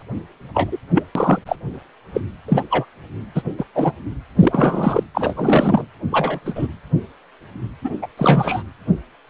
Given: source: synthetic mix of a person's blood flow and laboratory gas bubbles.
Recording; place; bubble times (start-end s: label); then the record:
Doppler ultrasound of blood flow; precordium
0.00-0.03 s: bubbles
0.54-0.78 s: bubbles
0.94-1.04 s: bubbles
1.15-1.39 s: bubbles
1.46-1.56 s: bubbles
2.13-2.21 s: bubbles
2.48-2.65 s: bubbles
2.70-2.85 s: bubbles
3.34-3.42 s: bubbles
3.58-3.65 s: bubbles
3.74-3.92 s: bubbles
4.39-5.03 s: bubbles
5.15-5.85 s: bubbles
6.12-6.39 s: bubbles
6.46-6.67 s: bubbles
7.84-7.90 s: bubbles
8.02-8.07 s: bubbles
8.18-8.62 s: bubbles
From the record:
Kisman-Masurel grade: 233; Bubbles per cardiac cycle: several, 3 to 8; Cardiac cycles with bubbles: 50 to 99%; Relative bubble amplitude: loud (0.450 to 0.775); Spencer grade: 3 (all of the cardiac periods contain showers or single bubble signals, but not dominating or overriding the cardiac motion signals); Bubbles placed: anywhere in the cardiac cycle